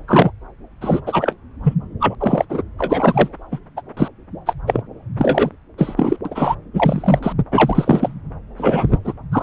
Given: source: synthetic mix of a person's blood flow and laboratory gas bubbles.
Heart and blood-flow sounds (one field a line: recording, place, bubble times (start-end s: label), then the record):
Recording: Doppler ultrasound of blood flow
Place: subclavian vein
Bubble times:
0.07-0.31 s: bubbles
0.81-1.01 s: bubbles
1.06-1.35 s: bubbles
1.64-1.75 s: bubbles
1.99-2.15 s: bubbles
2.20-2.46 s: bubbles
2.49-2.62 s: bubbles
2.78-3.30 s: bubbles
3.51-3.59 s: bubbles
3.76-3.81 s: bubbles
3.96-4.08 s: bubbles
4.46-4.54 s: bubbles
4.67-4.82 s: bubbles
5.17-5.50 s: bubbles
5.77-6.17 s: bubbles
6.25-6.55 s: bubbles
6.73-7.20 s: bubbles
7.22-7.33 s: bubbles
7.51-8.13 s: bubbles
8.57-8.98 s: bubbles
9.04-9.13 s: bubbles
9.31-9.43 s: bubbles
From the record:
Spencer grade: 3 (all of the cardiac periods contain showers or single bubble signals, but not dominating or overriding the cardiac motion signals)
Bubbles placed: anywhere in the cardiac cycle